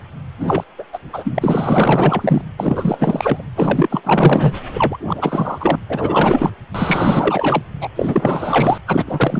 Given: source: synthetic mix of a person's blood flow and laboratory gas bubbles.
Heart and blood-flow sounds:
Doppler ultrasound of blood flow; precordium
0.40-0.64 s: bubbles
0.78-0.84 s: bubbles
0.92-0.98 s: bubbles
1.13-2.42 s: bubbles
2.59-3.44 s: bubbles
3.56-4.53 s: bubbles
4.73-4.98 s: bubbles
5.07-5.75 s: bubbles
5.88-6.50 s: bubbles
6.74-7.63 s: bubbles
7.81-7.89 s: bubbles
7.96-8.78 s: bubbles
8.87-9.40 s: bubbles
From the record:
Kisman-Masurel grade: 444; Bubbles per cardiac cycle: continuous sound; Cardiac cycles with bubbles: 100%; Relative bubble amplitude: maximal (0.775 to 0.999); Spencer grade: 4 (maximum detectable bubble signal sounding continuously throughout systole and diastole of every cardiac period, and overriding the amplitude of the normal cardiac signals); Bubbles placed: anywhere in the cardiac cycle

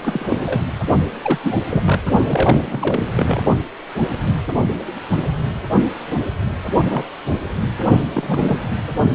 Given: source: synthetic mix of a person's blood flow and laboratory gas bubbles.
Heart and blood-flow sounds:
Doppler ultrasound of blood flow; precordium
0.04-0.61 s: bubbles
1.23-1.38 s: bubbles
1.42-1.61 s: bubbles
1.68-2.03 s: bubbles
2.27-2.57 s: bubbles
2.60-3.09 s: bubbles
3.16-3.40 s: bubbles
6.85-7.04 s: bubbles
8.13-8.58 s: bubbles
From the record:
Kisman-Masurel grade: 232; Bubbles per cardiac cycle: several, 3 to 8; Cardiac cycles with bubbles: 50 to 99%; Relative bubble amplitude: moderate (0.250 to 0.450); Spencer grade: 3 (all of the cardiac periods contain showers or single bubble signals, but not dominating or overriding the cardiac motion signals); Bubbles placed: only in the low amplitude regions of the cardiac cycle

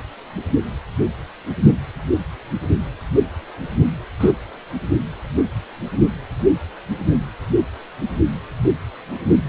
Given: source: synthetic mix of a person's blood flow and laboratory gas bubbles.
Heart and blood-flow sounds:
Doppler ultrasound of blood flow; precordium
4.21-4.30 s: bubbles
From the record:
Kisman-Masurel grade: 123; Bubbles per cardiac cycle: 1 to 2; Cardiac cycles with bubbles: 10 to 50%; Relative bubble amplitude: loud (0.450 to 0.775); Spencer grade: 2 (many but less than half of the cardiac periods contain bubble signals, singularly or in groups); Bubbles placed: anywhere in the cardiac cycle

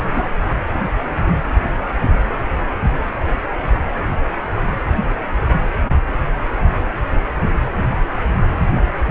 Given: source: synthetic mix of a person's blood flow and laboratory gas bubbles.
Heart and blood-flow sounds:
Doppler ultrasound of blood flow; precordium
0.12-0.23 s: bubbles
From the record:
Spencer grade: 1 (occasional bubble signal discernible with the cardiac motion signal, with majority of cardiac periods free of bubbles); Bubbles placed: anywhere in the cardiac cycle

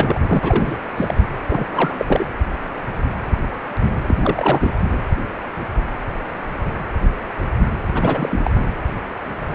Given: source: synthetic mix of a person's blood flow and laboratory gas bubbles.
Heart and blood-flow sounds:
Doppler ultrasound of blood flow; precordium
0.00-0.40 s: bubbles
0.42-0.77 s: bubbles
0.96-1.15 s: bubbles
1.47-2.26 s: bubbles
4.07-4.15 s: bubbles
4.23-4.73 s: bubbles
7.94-8.41 s: bubbles
8.44-8.51 s: bubbles
From the record:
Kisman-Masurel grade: 332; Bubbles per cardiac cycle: rolling drumbeat, 9 or more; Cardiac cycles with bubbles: 50 to 99%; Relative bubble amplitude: moderate (0.250 to 0.450); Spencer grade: 3 (all of the cardiac periods contain showers or single bubble signals, but not dominating or overriding the cardiac motion signals); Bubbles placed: anywhere in the cardiac cycle

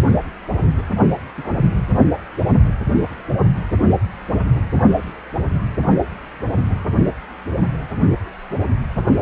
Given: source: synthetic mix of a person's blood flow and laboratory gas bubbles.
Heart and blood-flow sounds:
Doppler ultrasound of blood flow; precordium
0.77-0.82 s: bubbles
1.36-1.53 s: bubbles
From the record:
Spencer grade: 2 (many but less than half of the cardiac periods contain bubble signals, singularly or in groups); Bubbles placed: only in the low amplitude regions of the cardiac cycle

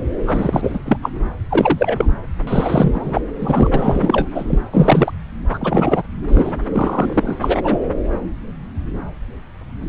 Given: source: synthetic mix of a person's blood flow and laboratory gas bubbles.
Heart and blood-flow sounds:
Doppler ultrasound of blood flow; subclavian vein
0.26-0.79 s: bubbles
0.85-0.97 s: bubbles
1.02-1.09 s: bubbles
1.50-2.10 s: bubbles
2.47-3.21 s: bubbles
3.38-3.71 s: bubbles
3.73-4.27 s: bubbles
4.34-4.59 s: bubbles
4.72-5.12 s: bubbles
5.50-6.03 s: bubbles
6.28-6.53 s: bubbles
6.72-7.36 s: bubbles
7.41-7.80 s: bubbles
From the record:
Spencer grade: 3 (all of the cardiac periods contain showers or single bubble signals, but not dominating or overriding the cardiac motion signals); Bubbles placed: anywhere in the cardiac cycle

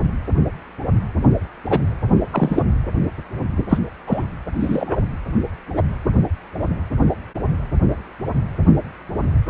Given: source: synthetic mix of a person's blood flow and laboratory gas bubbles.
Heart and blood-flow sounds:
Doppler ultrasound of blood flow; precordium
1.69-1.81 s: bubbles
2.31-2.63 s: bubbles
3.69-3.78 s: bubbles
4.07-4.25 s: bubbles
4.59-5.00 s: bubbles
5.75-5.82 s: bubbles
From the record:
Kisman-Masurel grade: 123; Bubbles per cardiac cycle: 1 to 2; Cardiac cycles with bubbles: 10 to 50%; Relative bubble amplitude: loud (0.450 to 0.775); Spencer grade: 2 (many but less than half of the cardiac periods contain bubble signals, singularly or in groups); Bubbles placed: anywhere in the cardiac cycle

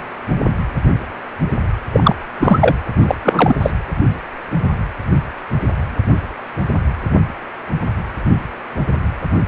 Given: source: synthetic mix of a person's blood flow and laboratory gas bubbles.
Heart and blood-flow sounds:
Doppler ultrasound of blood flow; precordium
1.92-2.15 s: bubbles
2.40-2.76 s: bubbles
3.02-3.15 s: bubbles
3.23-3.55 s: bubbles
3.62-3.71 s: bubbles
From the record:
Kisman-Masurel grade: 223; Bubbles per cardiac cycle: several, 3 to 8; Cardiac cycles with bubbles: 10 to 50%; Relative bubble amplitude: loud (0.450 to 0.775); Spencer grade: 2 (many but less than half of the cardiac periods contain bubble signals, singularly or in groups); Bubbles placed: anywhere in the cardiac cycle

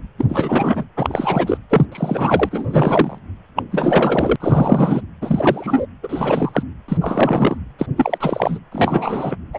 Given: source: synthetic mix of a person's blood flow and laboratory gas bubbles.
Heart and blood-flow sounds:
Doppler ultrasound of blood flow; precordium
0.18-0.25 s: bubbles
0.29-0.84 s: bubbles
0.96-1.58 s: bubbles
1.69-1.85 s: bubbles
1.92-3.19 s: bubbles
3.56-3.63 s: bubbles
3.72-4.36 s: bubbles
4.40-5.01 s: bubbles
5.21-5.86 s: bubbles
6.03-6.63 s: bubbles
6.88-6.98 s: bubbles
7.01-7.58 s: bubbles
7.79-7.86 s: bubbles
7.97-8.59 s: bubbles
8.71-9.36 s: bubbles
9.53-9.58 s: bubbles
From the record:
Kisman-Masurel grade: 343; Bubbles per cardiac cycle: rolling drumbeat, 9 or more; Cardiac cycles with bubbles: 100%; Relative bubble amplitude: loud (0.450 to 0.775); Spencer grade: 3 (all of the cardiac periods contain showers or single bubble signals, but not dominating or overriding the cardiac motion signals); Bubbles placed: anywhere in the cardiac cycle

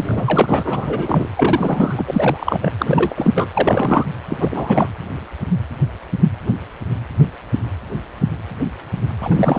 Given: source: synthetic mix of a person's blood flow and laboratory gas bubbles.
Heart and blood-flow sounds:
Doppler ultrasound of blood flow; precordium
0.00-1.28 s: bubbles
1.36-2.72 s: bubbles
2.78-3.32 s: bubbles
3.35-3.47 s: bubbles
3.54-4.05 s: bubbles
4.29-4.36 s: bubbles
4.39-4.88 s: bubbles
9.21-9.58 s: bubbles
From the record:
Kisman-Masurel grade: 333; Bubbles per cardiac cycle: rolling drumbeat, 9 or more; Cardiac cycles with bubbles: 50 to 99%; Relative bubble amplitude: loud (0.450 to 0.775); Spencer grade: 3 (all of the cardiac periods contain showers or single bubble signals, but not dominating or overriding the cardiac motion signals); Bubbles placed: anywhere in the cardiac cycle

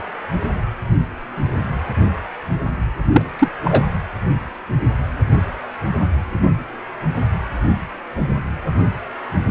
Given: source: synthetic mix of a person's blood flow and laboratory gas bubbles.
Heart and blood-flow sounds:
Doppler ultrasound of blood flow; precordium
3.11-3.21 s: bubbles
3.39-3.48 s: bubbles
3.64-3.83 s: bubbles
From the record:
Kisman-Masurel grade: 223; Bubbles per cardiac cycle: several, 3 to 8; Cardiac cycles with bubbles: 10 to 50%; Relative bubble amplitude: loud (0.450 to 0.775); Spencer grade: 2 (many but less than half of the cardiac periods contain bubble signals, singularly or in groups); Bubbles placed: anywhere in the cardiac cycle

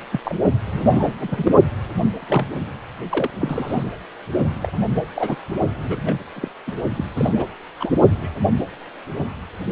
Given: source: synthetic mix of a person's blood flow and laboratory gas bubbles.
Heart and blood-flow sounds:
Doppler ultrasound of blood flow; precordium
0.12-0.20 s: bubbles
0.24-0.36 s: bubbles
0.66-1.15 s: bubbles
1.19-1.52 s: bubbles
2.22-2.25 s: bubbles
2.27-2.48 s: bubbles
2.51-2.56 s: bubbles
3.10-3.30 s: bubbles
3.40-3.84 s: bubbles
4.59-4.72 s: bubbles
5.16-5.35 s: bubbles
5.78-5.99 s: bubbles
6.04-6.14 s: bubbles
6.34-6.48 s: bubbles
6.67-6.75 s: bubbles
6.96-7.05 s: bubbles
7.16-7.44 s: bubbles
7.79-7.91 s: bubbles
8.21-8.30 s: bubbles
9.24-9.30 s: bubbles
From the record:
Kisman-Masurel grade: 242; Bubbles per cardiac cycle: several, 3 to 8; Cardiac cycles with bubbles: 100%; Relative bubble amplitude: moderate (0.250 to 0.450); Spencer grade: 3 (all of the cardiac periods contain showers or single bubble signals, but not dominating or overriding the cardiac motion signals); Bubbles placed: only in the low amplitude regions of the cardiac cycle

